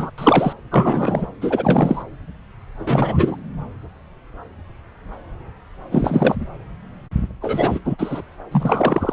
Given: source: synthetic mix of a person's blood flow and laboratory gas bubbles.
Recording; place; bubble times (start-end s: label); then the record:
Doppler ultrasound of blood flow; subclavian vein
0.00-0.10 s: bubbles
0.17-0.53 s: bubbles
0.71-1.27 s: bubbles
1.41-2.02 s: bubbles
2.78-3.36 s: bubbles
5.92-6.36 s: bubbles
7.42-7.79 s: bubbles
7.84-8.21 s: bubbles
8.51-9.13 s: bubbles
From the record:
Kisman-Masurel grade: 233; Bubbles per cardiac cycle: several, 3 to 8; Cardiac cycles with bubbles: 50 to 99%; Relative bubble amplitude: loud (0.450 to 0.775); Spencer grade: 3 (all of the cardiac periods contain showers or single bubble signals, but not dominating or overriding the cardiac motion signals); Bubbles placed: anywhere in the cardiac cycle